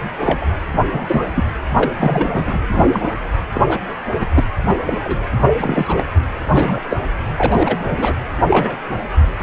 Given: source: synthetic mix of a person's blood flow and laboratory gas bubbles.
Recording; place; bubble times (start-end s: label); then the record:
Doppler ultrasound of blood flow; precordium
0.20-0.47 s: bubbles
0.90-1.22 s: bubbles
1.35-1.43 s: bubbles
1.76-1.92 s: bubbles
1.99-2.58 s: bubbles
2.73-3.09 s: bubbles
3.54-3.62 s: bubbles
3.68-3.80 s: bubbles
4.19-4.26 s: bubbles
4.33-4.44 s: bubbles
4.68-4.75 s: bubbles
4.84-4.97 s: bubbles
5.01-5.29 s: bubbles
5.38-5.54 s: bubbles
5.60-6.06 s: bubbles
6.49-6.79 s: bubbles
6.89-6.98 s: bubbles
7.37-7.77 s: bubbles
7.88-8.14 s: bubbles
8.48-8.77 s: bubbles
9.39-9.43 s: bubbles
From the record:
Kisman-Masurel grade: 242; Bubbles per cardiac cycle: several, 3 to 8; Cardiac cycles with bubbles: 100%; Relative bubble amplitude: moderate (0.250 to 0.450); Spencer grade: 3 (all of the cardiac periods contain showers or single bubble signals, but not dominating or overriding the cardiac motion signals); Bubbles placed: anywhere in the cardiac cycle